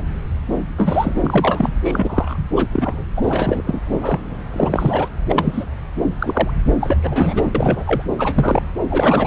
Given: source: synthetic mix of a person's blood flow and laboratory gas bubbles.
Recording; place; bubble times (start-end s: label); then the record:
Doppler ultrasound of blood flow; subclavian vein
0.00-0.03 s: bubbles
0.77-1.71 s: bubbles
1.83-2.38 s: bubbles
2.56-2.67 s: bubbles
2.71-3.04 s: bubbles
3.16-3.62 s: bubbles
3.67-3.82 s: bubbles
3.86-4.19 s: bubbles
4.52-5.08 s: bubbles
5.29-5.65 s: bubbles
6.18-6.53 s: bubbles
6.80-7.49 s: bubbles
7.54-8.03 s: bubbles
8.18-8.62 s: bubbles
8.90-9.27 s: bubbles
From the record:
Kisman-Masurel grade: 243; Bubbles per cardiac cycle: several, 3 to 8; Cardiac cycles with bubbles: 100%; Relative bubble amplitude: loud (0.450 to 0.775); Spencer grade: 3 (all of the cardiac periods contain showers or single bubble signals, but not dominating or overriding the cardiac motion signals); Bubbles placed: anywhere in the cardiac cycle